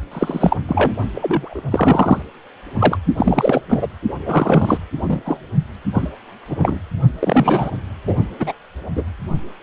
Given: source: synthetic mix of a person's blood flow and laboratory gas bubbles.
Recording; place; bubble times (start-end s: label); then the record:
Doppler ultrasound of blood flow; precordium
0.11-0.57 s: bubbles
0.68-0.94 s: bubbles
1.15-1.61 s: bubbles
1.71-2.23 s: bubbles
2.79-2.98 s: bubbles
3.17-3.60 s: bubbles
3.69-3.86 s: bubbles
4.25-4.80 s: bubbles
5.01-5.21 s: bubbles
5.25-5.40 s: bubbles
5.94-6.10 s: bubbles
6.49-6.79 s: bubbles
7.19-7.71 s: bubbles
8.06-8.16 s: bubbles
8.39-8.53 s: bubbles
8.95-9.04 s: bubbles
From the record:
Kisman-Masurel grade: 243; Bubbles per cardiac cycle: several, 3 to 8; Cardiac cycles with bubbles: 100%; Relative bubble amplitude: loud (0.450 to 0.775); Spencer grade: 3 (all of the cardiac periods contain showers or single bubble signals, but not dominating or overriding the cardiac motion signals); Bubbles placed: only in the low amplitude regions of the cardiac cycle